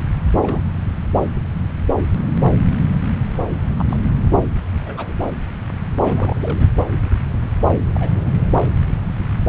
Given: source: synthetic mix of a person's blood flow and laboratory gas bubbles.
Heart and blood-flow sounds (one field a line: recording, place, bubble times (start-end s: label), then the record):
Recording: Doppler ultrasound of blood flow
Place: subclavian vein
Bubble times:
0.42-0.61 s: bubbles
3.79-4.00 s: bubbles
4.86-5.13 s: bubbles
6.00-6.71 s: bubbles
7.92-8.32 s: bubbles
From the record:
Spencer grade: 2 (many but less than half of the cardiac periods contain bubble signals, singularly or in groups)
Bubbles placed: anywhere in the cardiac cycle